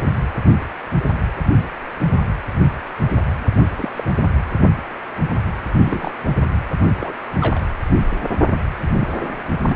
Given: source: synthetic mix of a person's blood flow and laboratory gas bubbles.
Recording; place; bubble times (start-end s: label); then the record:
Doppler ultrasound of blood flow; precordium
3.78-3.90 s: bubbles
3.94-4.04 s: bubbles
5.72-5.76 s: bubbles
5.83-6.12 s: bubbles
7.01-7.14 s: bubbles
7.41-7.65 s: bubbles
8.91-9.13 s: bubbles
9.20-9.34 s: bubbles
9.67-9.75 s: bubbles
From the record:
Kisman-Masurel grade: 221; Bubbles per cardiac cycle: several, 3 to 8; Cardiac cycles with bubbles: 10 to 50%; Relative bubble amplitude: barely perceptible (0.100 to 0.250); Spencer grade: 2 (many but less than half of the cardiac periods contain bubble signals, singularly or in groups); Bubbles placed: anywhere in the cardiac cycle